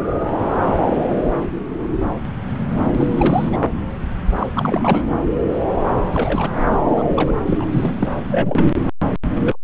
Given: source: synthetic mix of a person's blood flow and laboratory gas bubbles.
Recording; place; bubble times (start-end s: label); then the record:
Doppler ultrasound of blood flow; subclavian vein
2.81-2.87 s: bubbles
2.96-3.57 s: bubbles
4.39-4.47 s: bubbles
4.55-5.07 s: bubbles
6.12-6.51 s: bubbles
6.89-7.32 s: bubbles
7.46-8.10 s: bubbles
8.31-8.66 s: bubbles
9.38-9.56 s: bubbles
From the record:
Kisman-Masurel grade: 232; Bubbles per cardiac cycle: several, 3 to 8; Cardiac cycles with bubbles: 50 to 99%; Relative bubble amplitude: moderate (0.250 to 0.450); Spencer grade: 3 (all of the cardiac periods contain showers or single bubble signals, but not dominating or overriding the cardiac motion signals); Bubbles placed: anywhere in the cardiac cycle